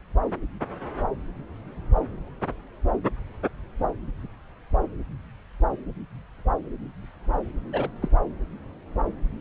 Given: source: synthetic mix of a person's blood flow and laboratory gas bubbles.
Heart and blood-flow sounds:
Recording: Doppler ultrasound of blood flow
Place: subclavian vein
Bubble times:
7.72-7.88 s: bubbles
8.02-8.08 s: bubbles
From the record:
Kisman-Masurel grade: 111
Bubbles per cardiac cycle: 1 to 2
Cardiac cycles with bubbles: 1 to 10%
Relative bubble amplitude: barely perceptible (0.100 to 0.250)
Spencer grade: 1 (occasional bubble signal discernible with the cardiac motion signal, with majority of cardiac periods free of bubbles)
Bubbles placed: anywhere in the cardiac cycle

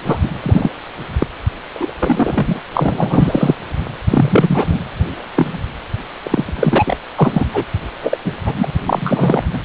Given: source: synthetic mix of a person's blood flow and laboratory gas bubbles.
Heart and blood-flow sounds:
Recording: Doppler ultrasound of blood flow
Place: precordium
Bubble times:
0.05-0.18 s: bubbles
0.23-0.29 s: bubbles
0.40-0.71 s: bubbles
1.19-1.27 s: bubbles
1.74-1.93 s: bubbles
1.99-2.61 s: bubbles
2.73-3.55 s: bubbles
4.08-4.79 s: bubbles
5.17-5.20 s: bubbles
5.36-5.58 s: bubbles
6.24-6.97 s: bubbles
7.16-7.46 s: bubbles
7.53-7.63 s: bubbles
8.03-8.18 s: bubbles
8.24-8.32 s: bubbles
8.46-8.71 s: bubbles
8.86-9.43 s: bubbles
9.53-9.61 s: bubbles
From the record:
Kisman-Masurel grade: 243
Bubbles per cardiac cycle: several, 3 to 8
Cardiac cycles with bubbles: 100%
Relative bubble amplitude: loud (0.450 to 0.775)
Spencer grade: 3 (all of the cardiac periods contain showers or single bubble signals, but not dominating or overriding the cardiac motion signals)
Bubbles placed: anywhere in the cardiac cycle

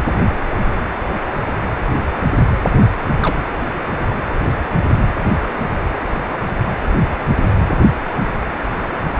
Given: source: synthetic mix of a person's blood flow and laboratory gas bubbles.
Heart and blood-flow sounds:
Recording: Doppler ultrasound of blood flow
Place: precordium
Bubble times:
3.21-3.34 s: bubbles
From the record:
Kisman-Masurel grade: 112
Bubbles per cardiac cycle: 1 to 2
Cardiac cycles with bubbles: 1 to 10%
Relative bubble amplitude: moderate (0.250 to 0.450)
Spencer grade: 1 (occasional bubble signal discernible with the cardiac motion signal, with majority of cardiac periods free of bubbles)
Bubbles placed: anywhere in the cardiac cycle

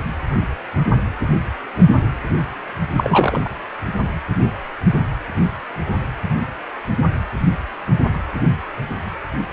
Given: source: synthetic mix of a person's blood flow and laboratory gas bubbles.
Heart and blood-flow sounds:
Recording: Doppler ultrasound of blood flow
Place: precordium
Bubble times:
2.97-3.48 s: bubbles
From the record:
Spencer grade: 1 (occasional bubble signal discernible with the cardiac motion signal, with majority of cardiac periods free of bubbles)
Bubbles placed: anywhere in the cardiac cycle

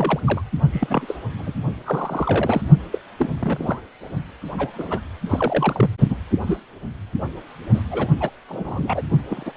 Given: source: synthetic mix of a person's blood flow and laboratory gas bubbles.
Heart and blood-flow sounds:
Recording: Doppler ultrasound of blood flow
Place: precordium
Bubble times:
0.00-0.20 s: bubbles
0.25-0.42 s: bubbles
0.72-1.16 s: bubbles
1.39-1.53 s: bubbles
1.86-2.62 s: bubbles
2.92-2.98 s: bubbles
3.19-3.29 s: bubbles
3.39-3.81 s: bubbles
4.58-4.70 s: bubbles
4.73-5.00 s: bubbles
5.29-5.90 s: bubbles
6.09-6.16 s: bubbles
6.46-6.58 s: bubbles
7.73-7.80 s: bubbles
7.91-8.08 s: bubbles
8.20-8.30 s: bubbles
8.48-9.02 s: bubbles
9.29-9.53 s: bubbles
From the record:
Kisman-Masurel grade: 242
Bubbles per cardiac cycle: several, 3 to 8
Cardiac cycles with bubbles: 100%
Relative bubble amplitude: moderate (0.250 to 0.450)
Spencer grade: 3 (all of the cardiac periods contain showers or single bubble signals, but not dominating or overriding the cardiac motion signals)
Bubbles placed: only in the low amplitude regions of the cardiac cycle

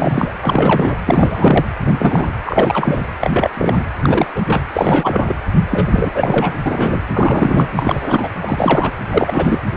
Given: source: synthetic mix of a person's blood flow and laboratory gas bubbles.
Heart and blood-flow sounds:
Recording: Doppler ultrasound of blood flow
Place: precordium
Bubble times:
0.00-0.34 s: bubbles
0.41-0.99 s: bubbles
1.05-1.66 s: bubbles
1.81-2.27 s: bubbles
2.46-3.05 s: bubbles
3.21-3.50 s: bubbles
3.54-3.83 s: bubbles
4.01-4.27 s: bubbles
4.35-4.42 s: bubbles
4.46-4.62 s: bubbles
4.73-5.34 s: bubbles
5.71-6.12 s: bubbles
6.14-6.54 s: bubbles
6.66-7.00 s: bubbles
7.13-7.67 s: bubbles
7.75-8.28 s: bubbles
8.41-8.91 s: bubbles
9.11-9.59 s: bubbles
From the record:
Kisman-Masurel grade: 343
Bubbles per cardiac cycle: rolling drumbeat, 9 or more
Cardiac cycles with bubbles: 100%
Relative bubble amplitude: loud (0.450 to 0.775)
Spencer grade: 3 (all of the cardiac periods contain showers or single bubble signals, but not dominating or overriding the cardiac motion signals)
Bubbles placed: anywhere in the cardiac cycle

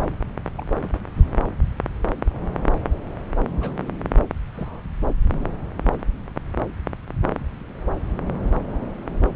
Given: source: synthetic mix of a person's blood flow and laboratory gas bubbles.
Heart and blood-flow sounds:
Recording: Doppler ultrasound of blood flow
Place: subclavian vein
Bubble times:
0.06-0.12 s: bubbles
0.59-0.65 s: bubbles
0.83-0.89 s: bubbles
0.93-0.98 s: bubbles
3.60-3.74 s: bubbles
3.79-3.91 s: bubbles
4.54-4.83 s: bubbles
From the record:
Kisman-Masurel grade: 121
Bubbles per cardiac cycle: 1 to 2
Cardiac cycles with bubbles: 10 to 50%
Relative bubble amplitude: barely perceptible (0.100 to 0.250)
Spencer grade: 2 (many but less than half of the cardiac periods contain bubble signals, singularly or in groups)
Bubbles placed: anywhere in the cardiac cycle

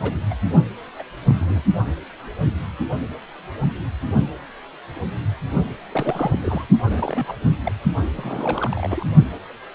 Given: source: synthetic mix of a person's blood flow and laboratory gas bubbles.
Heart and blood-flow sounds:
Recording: Doppler ultrasound of blood flow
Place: precordium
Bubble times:
0.02-0.14 s: bubbles
0.30-0.34 s: bubbles
0.98-1.02 s: bubbles
1.28-1.35 s: bubbles
1.40-1.62 s: bubbles
5.92-6.38 s: bubbles
6.41-6.65 s: bubbles
6.85-7.32 s: bubbles
7.63-7.72 s: bubbles
8.16-9.05 s: bubbles
From the record:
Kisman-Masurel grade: 221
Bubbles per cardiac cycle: several, 3 to 8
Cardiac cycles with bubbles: 10 to 50%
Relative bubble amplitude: barely perceptible (0.100 to 0.250)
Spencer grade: 2 (many but less than half of the cardiac periods contain bubble signals, singularly or in groups)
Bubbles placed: only in the low amplitude regions of the cardiac cycle

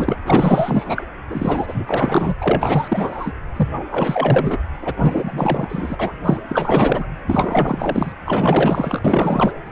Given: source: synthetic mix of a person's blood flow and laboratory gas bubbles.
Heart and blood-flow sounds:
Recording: Doppler ultrasound of blood flow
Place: precordium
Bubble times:
0.00-0.19 s: bubbles
0.26-1.06 s: bubbles
1.29-2.35 s: bubbles
2.41-3.33 s: bubbles
3.56-3.68 s: bubbles
3.91-4.58 s: bubbles
4.82-4.94 s: bubbles
4.96-5.96 s: bubbles
5.99-6.13 s: bubbles
6.24-6.41 s: bubbles
6.48-7.08 s: bubbles
7.27-8.12 s: bubbles
8.25-9.52 s: bubbles
9.65-9.71 s: bubbles
From the record:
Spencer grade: 4 (maximum detectable bubble signal sounding continuously throughout systole and diastole of every cardiac period, and overriding the amplitude of the normal cardiac signals)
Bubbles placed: anywhere in the cardiac cycle

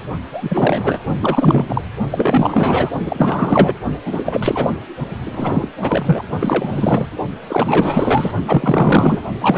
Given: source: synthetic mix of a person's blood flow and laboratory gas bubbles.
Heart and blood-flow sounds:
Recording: Doppler ultrasound of blood flow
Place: precordium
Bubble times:
0.32-0.99 s: bubbles
1.21-1.81 s: bubbles
2.11-2.90 s: bubbles
3.06-3.74 s: bubbles
4.05-4.71 s: bubbles
5.25-5.69 s: bubbles
5.82-6.24 s: bubbles
6.40-7.06 s: bubbles
7.48-8.31 s: bubbles
8.46-9.20 s: bubbles
9.40-9.58 s: bubbles
From the record:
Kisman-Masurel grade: 444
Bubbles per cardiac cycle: continuous sound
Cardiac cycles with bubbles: 100%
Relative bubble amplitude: maximal (0.775 to 0.999)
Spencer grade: 4 (maximum detectable bubble signal sounding continuously throughout systole and diastole of every cardiac period, and overriding the amplitude of the normal cardiac signals)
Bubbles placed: only in the low amplitude regions of the cardiac cycle

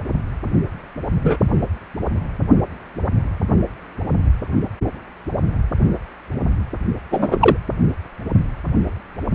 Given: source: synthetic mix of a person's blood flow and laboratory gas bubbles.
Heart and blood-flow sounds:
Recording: Doppler ultrasound of blood flow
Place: precordium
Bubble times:
1.24-1.36 s: bubbles
7.10-7.37 s: bubbles
7.39-7.57 s: bubbles
From the record:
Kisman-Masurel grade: 123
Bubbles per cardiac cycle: 1 to 2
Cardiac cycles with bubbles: 10 to 50%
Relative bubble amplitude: loud (0.450 to 0.775)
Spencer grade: 2 (many but less than half of the cardiac periods contain bubble signals, singularly or in groups)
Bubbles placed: anywhere in the cardiac cycle

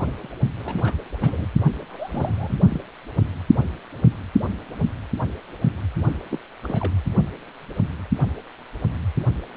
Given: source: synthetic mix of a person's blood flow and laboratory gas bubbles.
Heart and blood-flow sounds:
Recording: Doppler ultrasound of blood flow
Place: precordium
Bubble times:
0.00-0.29 s: bubbles
0.58-0.93 s: bubbles
1.21-1.46 s: bubbles
1.90-2.58 s: bubbles
2.70-2.80 s: bubbles
6.31-6.38 s: bubbles
6.62-6.92 s: bubbles
From the record:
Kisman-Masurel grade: 221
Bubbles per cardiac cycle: several, 3 to 8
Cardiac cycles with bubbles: 10 to 50%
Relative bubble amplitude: barely perceptible (0.100 to 0.250)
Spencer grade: 2 (many but less than half of the cardiac periods contain bubble signals, singularly or in groups)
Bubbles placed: anywhere in the cardiac cycle

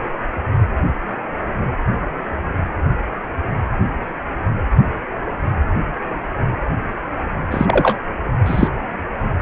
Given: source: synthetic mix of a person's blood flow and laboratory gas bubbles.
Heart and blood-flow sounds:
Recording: Doppler ultrasound of blood flow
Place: precordium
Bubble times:
7.50-7.99 s: bubbles
8.46-8.68 s: bubbles
From the record:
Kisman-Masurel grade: 213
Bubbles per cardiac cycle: several, 3 to 8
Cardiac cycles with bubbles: 1 to 10%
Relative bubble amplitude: loud (0.450 to 0.775)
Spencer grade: 1 (occasional bubble signal discernible with the cardiac motion signal, with majority of cardiac periods free of bubbles)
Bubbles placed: anywhere in the cardiac cycle

